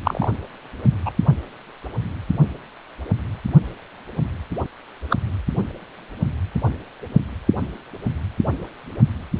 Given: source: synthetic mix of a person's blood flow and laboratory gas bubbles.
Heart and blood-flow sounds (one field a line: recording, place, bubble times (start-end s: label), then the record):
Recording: Doppler ultrasound of blood flow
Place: precordium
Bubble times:
0.03-0.28 s: bubbles
1.05-1.10 s: bubbles
5.09-5.17 s: bubbles
From the record:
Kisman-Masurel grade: 123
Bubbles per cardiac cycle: 1 to 2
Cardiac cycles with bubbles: 10 to 50%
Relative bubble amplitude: loud (0.450 to 0.775)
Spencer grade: 2 (many but less than half of the cardiac periods contain bubble signals, singularly or in groups)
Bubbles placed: only in the low amplitude regions of the cardiac cycle